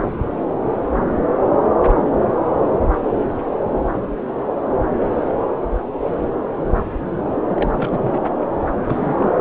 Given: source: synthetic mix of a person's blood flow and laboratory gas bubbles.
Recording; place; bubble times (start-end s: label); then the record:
Doppler ultrasound of blood flow; subclavian vein
7.49-8.20 s: bubbles
8.86-9.34 s: bubbles
From the record:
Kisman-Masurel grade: 221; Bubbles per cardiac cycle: several, 3 to 8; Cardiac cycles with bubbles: 10 to 50%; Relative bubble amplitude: barely perceptible (0.100 to 0.250); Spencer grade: 2 (many but less than half of the cardiac periods contain bubble signals, singularly or in groups); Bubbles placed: anywhere in the cardiac cycle